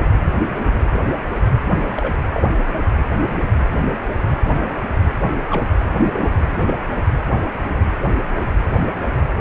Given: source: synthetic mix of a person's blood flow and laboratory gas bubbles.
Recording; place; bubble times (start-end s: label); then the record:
Doppler ultrasound of blood flow; precordium
0.93-1.00 s: bubbles
1.96-2.12 s: bubbles
2.33-2.46 s: bubbles
5.50-5.64 s: bubbles
5.89-6.29 s: bubbles
6.66-6.74 s: bubbles
From the record:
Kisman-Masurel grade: 122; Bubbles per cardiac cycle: 1 to 2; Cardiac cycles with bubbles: 10 to 50%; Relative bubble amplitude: moderate (0.250 to 0.450); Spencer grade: 2 (many but less than half of the cardiac periods contain bubble signals, singularly or in groups); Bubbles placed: anywhere in the cardiac cycle